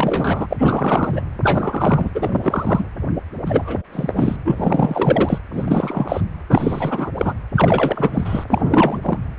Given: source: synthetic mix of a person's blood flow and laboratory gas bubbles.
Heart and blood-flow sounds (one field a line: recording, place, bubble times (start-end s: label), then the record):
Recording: Doppler ultrasound of blood flow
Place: precordium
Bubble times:
0.00-0.47 s: bubbles
0.50-1.22 s: bubbles
1.43-2.10 s: bubbles
2.15-2.85 s: bubbles
3.46-3.86 s: bubbles
3.92-4.36 s: bubbles
4.45-5.38 s: bubbles
5.52-6.20 s: bubbles
6.49-7.10 s: bubbles
7.17-7.33 s: bubbles
7.54-8.44 s: bubbles
8.50-9.19 s: bubbles
From the record:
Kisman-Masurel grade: 343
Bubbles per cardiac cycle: rolling drumbeat, 9 or more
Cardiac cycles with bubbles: 100%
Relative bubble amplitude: loud (0.450 to 0.775)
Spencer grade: 3 (all of the cardiac periods contain showers or single bubble signals, but not dominating or overriding the cardiac motion signals)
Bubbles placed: anywhere in the cardiac cycle